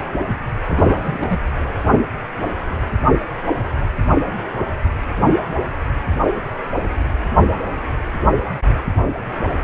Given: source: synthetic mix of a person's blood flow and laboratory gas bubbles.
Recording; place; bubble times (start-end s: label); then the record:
Doppler ultrasound of blood flow; precordium
0.67-1.40 s: bubbles
From the record:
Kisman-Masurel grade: 211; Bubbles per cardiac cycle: several, 3 to 8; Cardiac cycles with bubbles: 1 to 10%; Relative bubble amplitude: barely perceptible (0.100 to 0.250); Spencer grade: 1 (occasional bubble signal discernible with the cardiac motion signal, with majority of cardiac periods free of bubbles); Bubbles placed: anywhere in the cardiac cycle